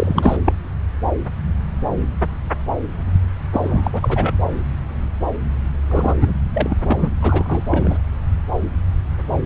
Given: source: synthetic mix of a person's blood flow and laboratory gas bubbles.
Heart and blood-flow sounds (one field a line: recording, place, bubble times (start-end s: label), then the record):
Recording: Doppler ultrasound of blood flow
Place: subclavian vein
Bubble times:
0.00-0.40 s: bubbles
0.45-0.53 s: bubbles
3.52-4.35 s: bubbles
5.89-6.15 s: bubbles
6.21-6.33 s: bubbles
6.54-6.77 s: bubbles
6.88-7.08 s: bubbles
7.22-7.98 s: bubbles
From the record:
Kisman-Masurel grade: 332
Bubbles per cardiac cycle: rolling drumbeat, 9 or more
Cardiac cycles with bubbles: 50 to 99%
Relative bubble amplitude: moderate (0.250 to 0.450)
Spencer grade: 3 (all of the cardiac periods contain showers or single bubble signals, but not dominating or overriding the cardiac motion signals)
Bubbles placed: anywhere in the cardiac cycle